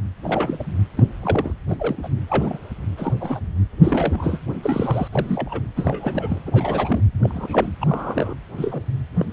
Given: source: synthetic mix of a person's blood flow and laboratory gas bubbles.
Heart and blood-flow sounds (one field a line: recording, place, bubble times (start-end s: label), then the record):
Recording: Doppler ultrasound of blood flow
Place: precordium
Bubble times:
0.24-0.66 s: bubbles
0.97-1.04 s: bubbles
1.22-1.54 s: bubbles
1.69-1.77 s: bubbles
1.79-2.09 s: bubbles
2.27-2.58 s: bubbles
2.97-3.13 s: bubbles
3.20-3.40 s: bubbles
3.82-4.38 s: bubbles
4.62-5.08 s: bubbles
5.12-5.63 s: bubbles
5.76-6.40 s: bubbles
6.46-7.02 s: bubbles
7.22-7.76 s: bubbles
7.80-8.34 s: bubbles
8.57-8.83 s: bubbles
9.18-9.25 s: bubbles
From the record:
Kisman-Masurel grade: 242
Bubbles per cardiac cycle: several, 3 to 8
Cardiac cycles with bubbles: 100%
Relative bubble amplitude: moderate (0.250 to 0.450)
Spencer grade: 3 (all of the cardiac periods contain showers or single bubble signals, but not dominating or overriding the cardiac motion signals)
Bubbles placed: anywhere in the cardiac cycle